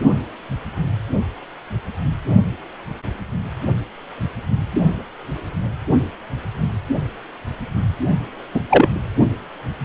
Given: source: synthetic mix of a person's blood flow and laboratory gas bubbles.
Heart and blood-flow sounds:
Doppler ultrasound of blood flow; precordium
8.54-8.61 s: bubbles
8.69-8.87 s: bubbles
From the record:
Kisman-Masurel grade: 223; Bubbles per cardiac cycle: several, 3 to 8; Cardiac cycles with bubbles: 10 to 50%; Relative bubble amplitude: loud (0.450 to 0.775); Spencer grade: 2 (many but less than half of the cardiac periods contain bubble signals, singularly or in groups); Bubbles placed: only in the low amplitude regions of the cardiac cycle

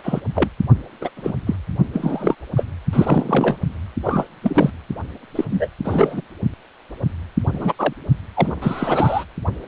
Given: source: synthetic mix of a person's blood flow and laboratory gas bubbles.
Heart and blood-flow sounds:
Doppler ultrasound of blood flow; precordium
0.03-0.20 s: bubbles
0.35-0.50 s: bubbles
1.00-1.10 s: bubbles
1.16-1.33 s: bubbles
1.46-1.56 s: bubbles
1.93-2.35 s: bubbles
2.56-2.65 s: bubbles
2.92-3.56 s: bubbles
4.03-4.27 s: bubbles
4.43-4.70 s: bubbles
5.35-5.45 s: bubbles
5.50-5.68 s: bubbles
5.84-6.21 s: bubbles
7.53-7.73 s: bubbles
7.79-7.93 s: bubbles
8.36-8.52 s: bubbles
8.61-9.24 s: bubbles
From the record:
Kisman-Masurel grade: 243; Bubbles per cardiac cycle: several, 3 to 8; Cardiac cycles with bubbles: 100%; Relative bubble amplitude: loud (0.450 to 0.775); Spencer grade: 3 (all of the cardiac periods contain showers or single bubble signals, but not dominating or overriding the cardiac motion signals); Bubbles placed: only in the low amplitude regions of the cardiac cycle

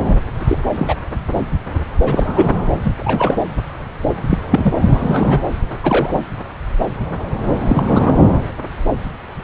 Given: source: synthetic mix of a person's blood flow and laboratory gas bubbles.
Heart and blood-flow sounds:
Doppler ultrasound of blood flow; subclavian vein
0.47-0.58 s: bubbles
0.75-0.95 s: bubbles
2.03-2.51 s: bubbles
2.83-3.52 s: bubbles
4.30-4.38 s: bubbles
4.50-4.74 s: bubbles
4.87-5.42 s: bubbles
5.83-6.11 s: bubbles
6.14-6.20 s: bubbles
7.60-8.17 s: bubbles
From the record:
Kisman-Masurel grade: 223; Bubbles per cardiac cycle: several, 3 to 8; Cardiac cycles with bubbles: 10 to 50%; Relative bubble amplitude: loud (0.450 to 0.775); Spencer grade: 2 (many but less than half of the cardiac periods contain bubble signals, singularly or in groups); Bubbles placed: anywhere in the cardiac cycle

